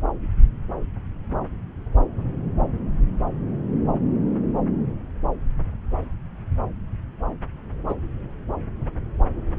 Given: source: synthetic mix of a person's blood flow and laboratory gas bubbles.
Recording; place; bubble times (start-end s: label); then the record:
Doppler ultrasound of blood flow; subclavian vein
7.88-7.95 s: bubbles
From the record:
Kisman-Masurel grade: 113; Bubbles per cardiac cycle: 1 to 2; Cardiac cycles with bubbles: 1 to 10%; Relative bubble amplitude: loud (0.450 to 0.775); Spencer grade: 1 (occasional bubble signal discernible with the cardiac motion signal, with majority of cardiac periods free of bubbles); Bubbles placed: anywhere in the cardiac cycle